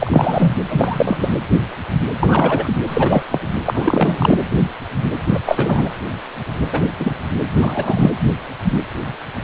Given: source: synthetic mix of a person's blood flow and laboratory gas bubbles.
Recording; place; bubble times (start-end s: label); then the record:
Doppler ultrasound of blood flow; precordium
0.00-0.52 s: bubbles
0.69-1.33 s: bubbles
2.19-2.73 s: bubbles
2.88-3.23 s: bubbles
3.31-3.40 s: bubbles
3.66-4.38 s: bubbles
5.33-5.39 s: bubbles
5.46-5.89 s: bubbles
6.72-6.83 s: bubbles
6.99-7.20 s: bubbles
7.59-8.12 s: bubbles
From the record:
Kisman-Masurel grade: 233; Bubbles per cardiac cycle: several, 3 to 8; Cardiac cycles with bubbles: 50 to 99%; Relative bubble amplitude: loud (0.450 to 0.775); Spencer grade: 3 (all of the cardiac periods contain showers or single bubble signals, but not dominating or overriding the cardiac motion signals); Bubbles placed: anywhere in the cardiac cycle